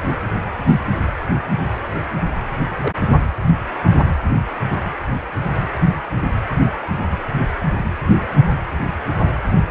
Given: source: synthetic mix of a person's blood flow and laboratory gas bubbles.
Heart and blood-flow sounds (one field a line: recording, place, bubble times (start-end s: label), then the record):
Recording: Doppler ultrasound of blood flow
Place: precordium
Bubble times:
2.82-2.92 s: bubbles
From the record:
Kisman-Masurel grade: 111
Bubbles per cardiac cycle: 1 to 2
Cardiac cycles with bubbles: 1 to 10%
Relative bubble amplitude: barely perceptible (0.100 to 0.250)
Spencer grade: 1 (occasional bubble signal discernible with the cardiac motion signal, with majority of cardiac periods free of bubbles)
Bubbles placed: anywhere in the cardiac cycle